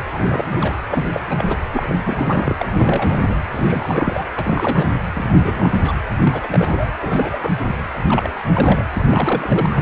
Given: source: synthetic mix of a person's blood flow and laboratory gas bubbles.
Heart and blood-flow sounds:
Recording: Doppler ultrasound of blood flow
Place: precordium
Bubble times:
0.13-0.45 s: bubbles
0.50-0.74 s: bubbles
0.90-1.09 s: bubbles
1.14-1.20 s: bubbles
1.29-1.57 s: bubbles
1.73-1.94 s: bubbles
2.04-2.66 s: bubbles
2.73-3.35 s: bubbles
3.50-4.25 s: bubbles
4.36-4.95 s: bubbles
5.13-5.97 s: bubbles
6.21-6.90 s: bubbles
6.99-7.54 s: bubbles
8.09-8.33 s: bubbles
8.53-8.85 s: bubbles
8.94-9.02 s: bubbles
9.07-9.66 s: bubbles
9.70-9.82 s: bubbles
From the record:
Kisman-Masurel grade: 342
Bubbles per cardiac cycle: rolling drumbeat, 9 or more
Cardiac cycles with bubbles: 100%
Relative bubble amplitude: moderate (0.250 to 0.450)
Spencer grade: 3 (all of the cardiac periods contain showers or single bubble signals, but not dominating or overriding the cardiac motion signals)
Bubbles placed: anywhere in the cardiac cycle

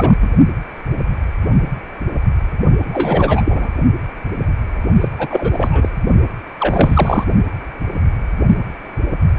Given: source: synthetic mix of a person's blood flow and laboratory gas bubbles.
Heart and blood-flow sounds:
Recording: Doppler ultrasound of blood flow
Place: precordium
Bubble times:
0.00-0.15 s: bubbles
0.20-0.28 s: bubbles
2.84-3.71 s: bubbles
5.00-5.08 s: bubbles
5.18-5.89 s: bubbles
6.59-7.25 s: bubbles
From the record:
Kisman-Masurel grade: 333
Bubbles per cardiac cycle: rolling drumbeat, 9 or more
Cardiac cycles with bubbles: 50 to 99%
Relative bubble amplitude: loud (0.450 to 0.775)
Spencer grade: 3 (all of the cardiac periods contain showers or single bubble signals, but not dominating or overriding the cardiac motion signals)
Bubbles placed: only in the low amplitude regions of the cardiac cycle

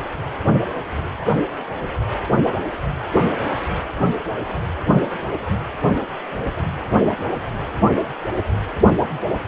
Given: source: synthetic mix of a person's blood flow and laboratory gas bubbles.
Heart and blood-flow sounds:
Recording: Doppler ultrasound of blood flow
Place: precordium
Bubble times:
no bubbles
From the record:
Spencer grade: 0 (complete lack of bubble signals)

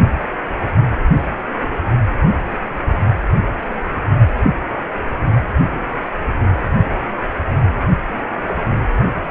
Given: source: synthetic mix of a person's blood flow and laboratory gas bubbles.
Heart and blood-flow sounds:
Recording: Doppler ultrasound of blood flow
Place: precordium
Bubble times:
no bubbles
From the record:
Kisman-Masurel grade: 000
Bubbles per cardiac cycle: 0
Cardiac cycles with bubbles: 0%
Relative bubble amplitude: no bubbles discernible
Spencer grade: 0 (complete lack of bubble signals)

